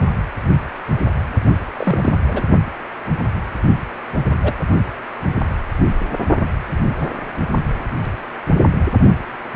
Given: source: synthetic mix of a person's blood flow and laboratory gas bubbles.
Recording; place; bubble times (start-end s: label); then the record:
Doppler ultrasound of blood flow; precordium
1.76-2.14 s: bubbles
2.27-2.43 s: bubbles
4.42-4.53 s: bubbles
7.00-7.08 s: bubbles
From the record:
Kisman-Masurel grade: 122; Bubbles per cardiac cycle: 1 to 2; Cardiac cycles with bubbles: 10 to 50%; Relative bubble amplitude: moderate (0.250 to 0.450); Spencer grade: 2 (many but less than half of the cardiac periods contain bubble signals, singularly or in groups); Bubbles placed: only in the low amplitude regions of the cardiac cycle